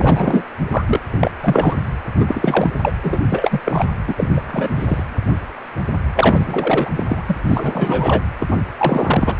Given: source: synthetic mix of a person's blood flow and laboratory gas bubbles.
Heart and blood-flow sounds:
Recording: Doppler ultrasound of blood flow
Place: precordium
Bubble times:
0.00-0.44 s: bubbles
0.71-0.84 s: bubbles
0.87-1.00 s: bubbles
1.12-1.31 s: bubbles
1.43-1.76 s: bubbles
2.20-2.25 s: bubbles
2.28-2.73 s: bubbles
2.82-2.92 s: bubbles
3.02-3.19 s: bubbles
3.29-3.60 s: bubbles
3.64-3.87 s: bubbles
4.07-4.41 s: bubbles
4.47-5.04 s: bubbles
6.15-6.90 s: bubbles
6.96-7.04 s: bubbles
7.06-7.23 s: bubbles
7.27-7.37 s: bubbles
7.42-8.22 s: bubbles
8.38-8.58 s: bubbles
8.78-9.35 s: bubbles
From the record:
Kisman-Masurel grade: 333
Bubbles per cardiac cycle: rolling drumbeat, 9 or more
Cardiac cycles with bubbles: 50 to 99%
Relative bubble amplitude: loud (0.450 to 0.775)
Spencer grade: 3 (all of the cardiac periods contain showers or single bubble signals, but not dominating or overriding the cardiac motion signals)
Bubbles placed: anywhere in the cardiac cycle

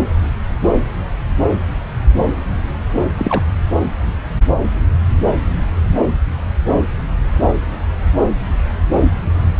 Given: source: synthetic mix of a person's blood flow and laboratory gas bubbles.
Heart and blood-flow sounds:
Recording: Doppler ultrasound of blood flow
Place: subclavian vein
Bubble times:
3.17-3.43 s: bubbles
From the record:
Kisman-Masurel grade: 212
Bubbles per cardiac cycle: several, 3 to 8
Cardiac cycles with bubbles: 1 to 10%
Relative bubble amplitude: moderate (0.250 to 0.450)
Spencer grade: 1 (occasional bubble signal discernible with the cardiac motion signal, with majority of cardiac periods free of bubbles)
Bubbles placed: anywhere in the cardiac cycle

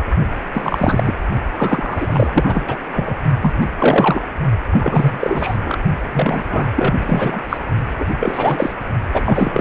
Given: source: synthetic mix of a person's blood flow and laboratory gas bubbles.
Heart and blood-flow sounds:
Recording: Doppler ultrasound of blood flow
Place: precordium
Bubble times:
0.00-0.08 s: bubbles
0.53-1.16 s: bubbles
1.57-2.76 s: bubbles
2.92-3.16 s: bubbles
3.41-3.53 s: bubbles
3.60-3.67 s: bubbles
3.78-4.21 s: bubbles
4.71-5.58 s: bubbles
5.64-5.79 s: bubbles
6.12-6.67 s: bubbles
6.76-6.94 s: bubbles
7.00-7.43 s: bubbles
7.49-7.58 s: bubbles
7.99-8.06 s: bubbles
8.20-8.73 s: bubbles
9.13-9.61 s: bubbles
From the record:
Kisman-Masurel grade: 343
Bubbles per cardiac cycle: rolling drumbeat, 9 or more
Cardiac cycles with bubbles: 100%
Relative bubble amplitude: loud (0.450 to 0.775)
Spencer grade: 3 (all of the cardiac periods contain showers or single bubble signals, but not dominating or overriding the cardiac motion signals)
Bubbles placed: only in the low amplitude regions of the cardiac cycle

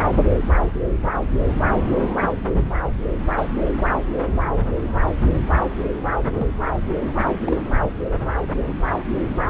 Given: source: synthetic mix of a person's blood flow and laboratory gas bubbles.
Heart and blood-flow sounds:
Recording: Doppler ultrasound of blood flow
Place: subclavian vein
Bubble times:
3.30-3.64 s: bubbles
6.38-6.46 s: bubbles
6.60-6.70 s: bubbles
7.36-7.57 s: bubbles
From the record:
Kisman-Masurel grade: 121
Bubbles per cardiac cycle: 1 to 2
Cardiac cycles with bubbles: 10 to 50%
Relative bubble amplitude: barely perceptible (0.100 to 0.250)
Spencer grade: 2 (many but less than half of the cardiac periods contain bubble signals, singularly or in groups)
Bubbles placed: anywhere in the cardiac cycle

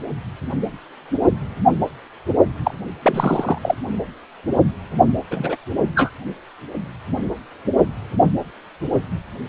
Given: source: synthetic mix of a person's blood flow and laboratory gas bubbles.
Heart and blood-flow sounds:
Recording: Doppler ultrasound of blood flow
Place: precordium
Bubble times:
2.65-2.74 s: bubbles
3.02-3.58 s: bubbles
3.62-3.75 s: bubbles
5.30-5.56 s: bubbles
5.95-6.11 s: bubbles
From the record:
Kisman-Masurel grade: 222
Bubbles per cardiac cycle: several, 3 to 8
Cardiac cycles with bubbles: 10 to 50%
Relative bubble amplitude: moderate (0.250 to 0.450)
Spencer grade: 2 (many but less than half of the cardiac periods contain bubble signals, singularly or in groups)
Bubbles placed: only in the low amplitude regions of the cardiac cycle

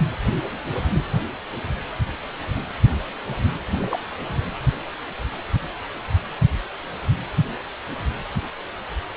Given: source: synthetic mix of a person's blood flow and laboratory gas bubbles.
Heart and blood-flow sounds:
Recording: Doppler ultrasound of blood flow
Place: precordium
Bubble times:
3.70-3.99 s: bubbles
From the record:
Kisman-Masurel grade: 111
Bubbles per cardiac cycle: 1 to 2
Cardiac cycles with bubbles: 1 to 10%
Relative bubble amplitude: barely perceptible (0.100 to 0.250)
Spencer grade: 1 (occasional bubble signal discernible with the cardiac motion signal, with majority of cardiac periods free of bubbles)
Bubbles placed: anywhere in the cardiac cycle

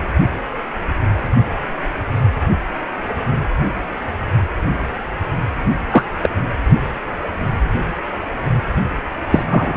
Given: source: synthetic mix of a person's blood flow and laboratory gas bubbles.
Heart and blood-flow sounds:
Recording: Doppler ultrasound of blood flow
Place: precordium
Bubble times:
5.92-6.04 s: bubbles
6.22-6.29 s: bubbles
9.31-9.44 s: bubbles
9.50-9.77 s: bubbles
From the record:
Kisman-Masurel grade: 123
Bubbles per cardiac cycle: 1 to 2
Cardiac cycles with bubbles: 10 to 50%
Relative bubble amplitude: loud (0.450 to 0.775)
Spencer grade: 2 (many but less than half of the cardiac periods contain bubble signals, singularly or in groups)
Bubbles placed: anywhere in the cardiac cycle

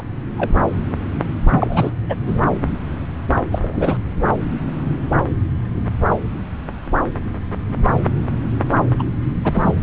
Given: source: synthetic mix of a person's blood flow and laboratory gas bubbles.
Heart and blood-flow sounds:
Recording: Doppler ultrasound of blood flow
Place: subclavian vein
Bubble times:
0.00-0.03 s: bubbles
0.38-0.51 s: bubbles
1.49-1.91 s: bubbles
2.09-2.15 s: bubbles
2.26-2.38 s: bubbles
3.51-3.58 s: bubbles
3.62-3.98 s: bubbles
8.99-9.04 s: bubbles
9.43-9.73 s: bubbles
From the record:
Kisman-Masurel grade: 223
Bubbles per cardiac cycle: several, 3 to 8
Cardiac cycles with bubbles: 10 to 50%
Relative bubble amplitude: loud (0.450 to 0.775)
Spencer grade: 2 (many but less than half of the cardiac periods contain bubble signals, singularly or in groups)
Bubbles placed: anywhere in the cardiac cycle

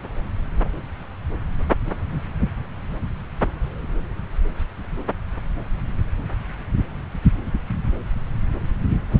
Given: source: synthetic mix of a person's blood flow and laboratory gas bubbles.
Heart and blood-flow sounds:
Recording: Doppler ultrasound of blood flow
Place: subclavian vein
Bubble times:
no bubbles
From the record:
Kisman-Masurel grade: 000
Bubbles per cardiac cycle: 0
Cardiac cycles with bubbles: 0%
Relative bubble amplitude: no bubbles discernible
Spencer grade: 0 (complete lack of bubble signals)

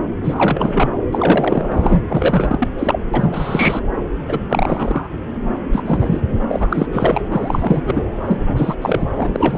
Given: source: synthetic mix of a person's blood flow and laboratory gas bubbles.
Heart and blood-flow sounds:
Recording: Doppler ultrasound of blood flow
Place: subclavian vein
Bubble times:
0.21-0.89 s: bubbles
1.11-2.02 s: bubbles
2.09-2.68 s: bubbles
2.78-3.00 s: bubbles
3.14-3.84 s: bubbles
4.28-4.38 s: bubbles
4.49-5.08 s: bubbles
5.73-6.22 s: bubbles
6.49-6.87 s: bubbles
6.92-7.21 s: bubbles
7.30-8.02 s: bubbles
8.26-8.38 s: bubbles
8.40-8.75 s: bubbles
8.81-9.06 s: bubbles
9.16-9.58 s: bubbles
From the record:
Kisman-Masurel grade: 343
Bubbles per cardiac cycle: rolling drumbeat, 9 or more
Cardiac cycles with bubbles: 100%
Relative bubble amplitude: loud (0.450 to 0.775)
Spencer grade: 3 (all of the cardiac periods contain showers or single bubble signals, but not dominating or overriding the cardiac motion signals)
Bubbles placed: anywhere in the cardiac cycle

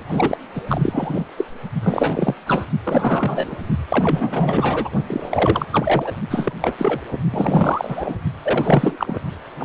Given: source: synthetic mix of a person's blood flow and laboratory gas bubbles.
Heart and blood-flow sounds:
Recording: Doppler ultrasound of blood flow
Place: precordium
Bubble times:
0.08-0.38 s: bubbles
0.55-0.61 s: bubbles
0.67-1.26 s: bubbles
1.37-1.45 s: bubbles
1.82-2.34 s: bubbles
2.47-2.65 s: bubbles
2.83-3.56 s: bubbles
3.89-4.91 s: bubbles
5.07-5.66 s: bubbles
5.72-6.12 s: bubbles
6.30-6.53 s: bubbles
6.61-6.73 s: bubbles
6.78-7.01 s: bubbles
7.11-7.18 s: bubbles
7.30-8.16 s: bubbles
8.43-9.21 s: bubbles
9.59-9.65 s: bubbles
From the record:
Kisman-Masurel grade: 342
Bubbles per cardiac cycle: rolling drumbeat, 9 or more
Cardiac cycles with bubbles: 100%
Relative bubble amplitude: moderate (0.250 to 0.450)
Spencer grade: 3 (all of the cardiac periods contain showers or single bubble signals, but not dominating or overriding the cardiac motion signals)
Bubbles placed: only in the low amplitude regions of the cardiac cycle

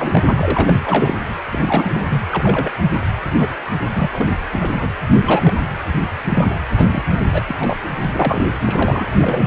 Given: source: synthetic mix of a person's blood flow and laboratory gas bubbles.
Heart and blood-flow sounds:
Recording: Doppler ultrasound of blood flow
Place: precordium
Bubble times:
0.00-0.23 s: bubbles
0.30-0.75 s: bubbles
0.85-1.16 s: bubbles
1.49-2.21 s: bubbles
2.31-2.76 s: bubbles
3.35-3.53 s: bubbles
3.84-3.87 s: bubbles
3.95-4.28 s: bubbles
4.53-4.70 s: bubbles
4.78-4.90 s: bubbles
5.10-5.53 s: bubbles
6.24-6.59 s: bubbles
6.76-7.03 s: bubbles
7.14-7.20 s: bubbles
7.33-7.42 s: bubbles
7.46-7.55 s: bubbles
7.60-7.77 s: bubbles
8.01-8.45 s: bubbles
8.65-9.06 s: bubbles
9.12-9.47 s: bubbles
From the record:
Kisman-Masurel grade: 242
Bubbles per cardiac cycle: several, 3 to 8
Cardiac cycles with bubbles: 100%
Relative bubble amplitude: moderate (0.250 to 0.450)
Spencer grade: 3 (all of the cardiac periods contain showers or single bubble signals, but not dominating or overriding the cardiac motion signals)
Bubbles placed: anywhere in the cardiac cycle

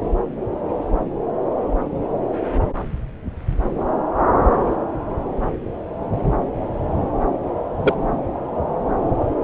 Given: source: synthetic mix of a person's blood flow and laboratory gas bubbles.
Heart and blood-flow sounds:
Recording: Doppler ultrasound of blood flow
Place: subclavian vein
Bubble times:
7.82-7.94 s: bubbles
From the record:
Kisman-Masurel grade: 113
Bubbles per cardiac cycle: 1 to 2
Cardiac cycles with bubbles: 1 to 10%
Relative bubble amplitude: loud (0.450 to 0.775)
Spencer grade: 1 (occasional bubble signal discernible with the cardiac motion signal, with majority of cardiac periods free of bubbles)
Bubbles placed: anywhere in the cardiac cycle

